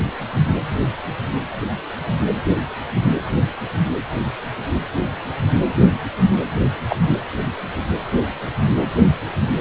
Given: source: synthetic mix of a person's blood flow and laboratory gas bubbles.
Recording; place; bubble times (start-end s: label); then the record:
Doppler ultrasound of blood flow; precordium
6.89-6.96 s: bubbles
From the record:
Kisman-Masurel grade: 113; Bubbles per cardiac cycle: 1 to 2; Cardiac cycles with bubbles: 1 to 10%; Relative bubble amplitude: loud (0.450 to 0.775); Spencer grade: 1 (occasional bubble signal discernible with the cardiac motion signal, with majority of cardiac periods free of bubbles); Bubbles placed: anywhere in the cardiac cycle